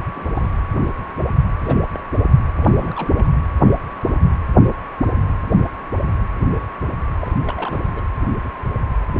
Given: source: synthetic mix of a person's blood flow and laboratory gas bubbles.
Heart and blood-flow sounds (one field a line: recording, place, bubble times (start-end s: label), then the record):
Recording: Doppler ultrasound of blood flow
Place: precordium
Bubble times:
0.15-0.29 s: bubbles
0.35-0.48 s: bubbles
1.64-1.80 s: bubbles
1.93-2.03 s: bubbles
2.12-2.19 s: bubbles
2.56-3.10 s: bubbles
3.17-3.26 s: bubbles
7.21-7.32 s: bubbles
7.45-7.79 s: bubbles
7.96-8.02 s: bubbles
From the record:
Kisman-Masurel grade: 221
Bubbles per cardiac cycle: several, 3 to 8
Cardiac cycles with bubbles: 10 to 50%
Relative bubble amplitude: barely perceptible (0.100 to 0.250)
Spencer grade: 2 (many but less than half of the cardiac periods contain bubble signals, singularly or in groups)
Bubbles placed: anywhere in the cardiac cycle